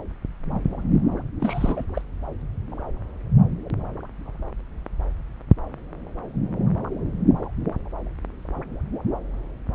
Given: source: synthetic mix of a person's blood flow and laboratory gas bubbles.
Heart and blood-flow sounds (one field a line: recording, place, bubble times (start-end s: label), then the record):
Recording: Doppler ultrasound of blood flow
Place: subclavian vein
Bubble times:
1.40-1.83 s: bubbles
1.94-2.02 s: bubbles
From the record:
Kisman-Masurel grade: 211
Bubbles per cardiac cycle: several, 3 to 8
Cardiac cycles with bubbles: 1 to 10%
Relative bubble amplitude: barely perceptible (0.100 to 0.250)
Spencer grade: 1 (occasional bubble signal discernible with the cardiac motion signal, with majority of cardiac periods free of bubbles)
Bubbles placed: anywhere in the cardiac cycle